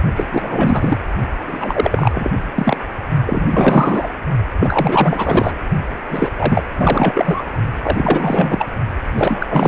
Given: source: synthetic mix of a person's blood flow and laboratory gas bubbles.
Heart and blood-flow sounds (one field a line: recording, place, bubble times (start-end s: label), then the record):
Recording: Doppler ultrasound of blood flow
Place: precordium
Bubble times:
0.16-0.25 s: bubbles
0.30-0.97 s: bubbles
1.47-2.31 s: bubbles
2.55-2.77 s: bubbles
3.26-3.48 s: bubbles
3.50-4.08 s: bubbles
4.60-5.52 s: bubbles
6.11-6.33 s: bubbles
6.38-6.63 s: bubbles
6.79-7.43 s: bubbles
7.82-8.70 s: bubbles
9.14-9.68 s: bubbles
From the record:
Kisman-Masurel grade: 444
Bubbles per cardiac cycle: continuous sound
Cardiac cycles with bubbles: 100%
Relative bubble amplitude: maximal (0.775 to 0.999)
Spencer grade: 4 (maximum detectable bubble signal sounding continuously throughout systole and diastole of every cardiac period, and overriding the amplitude of the normal cardiac signals)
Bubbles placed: only in the low amplitude regions of the cardiac cycle